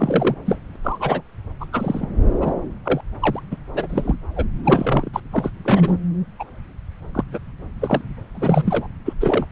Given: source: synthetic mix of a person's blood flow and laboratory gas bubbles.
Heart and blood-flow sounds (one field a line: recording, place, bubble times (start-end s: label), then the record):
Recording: Doppler ultrasound of blood flow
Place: subclavian vein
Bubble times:
0.00-0.35 s: bubbles
0.45-0.59 s: bubbles
0.75-0.77 s: bubbles
0.83-1.22 s: bubbles
1.60-1.66 s: bubbles
1.73-2.08 s: bubbles
2.41-2.53 s: bubbles
2.83-3.01 s: bubbles
3.20-3.41 s: bubbles
3.50-3.57 s: bubbles
3.74-4.15 s: bubbles
4.35-4.46 s: bubbles
4.63-5.09 s: bubbles
5.13-5.20 s: bubbles
5.31-5.50 s: bubbles
5.64-5.98 s: bubbles
6.39-6.44 s: bubbles
7.14-7.24 s: bubbles
7.32-7.38 s: bubbles
7.80-8.02 s: bubbles
8.34-8.88 s: bubbles
9.05-9.13 s: bubbles
9.20-9.46 s: bubbles
From the record:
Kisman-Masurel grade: 243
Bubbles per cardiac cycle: several, 3 to 8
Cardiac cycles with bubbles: 100%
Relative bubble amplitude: loud (0.450 to 0.775)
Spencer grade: 3 (all of the cardiac periods contain showers or single bubble signals, but not dominating or overriding the cardiac motion signals)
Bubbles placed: anywhere in the cardiac cycle